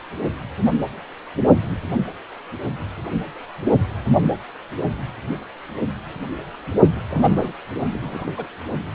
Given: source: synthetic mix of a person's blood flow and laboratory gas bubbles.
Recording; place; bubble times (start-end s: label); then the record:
Doppler ultrasound of blood flow; precordium
6.92-7.01 s: bubbles
7.10-7.53 s: bubbles
7.91-8.31 s: bubbles
8.38-8.48 s: bubbles
From the record:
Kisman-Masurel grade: 221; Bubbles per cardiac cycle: several, 3 to 8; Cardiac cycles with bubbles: 10 to 50%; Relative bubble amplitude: barely perceptible (0.100 to 0.250); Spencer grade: 2 (many but less than half of the cardiac periods contain bubble signals, singularly or in groups); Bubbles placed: only in the low amplitude regions of the cardiac cycle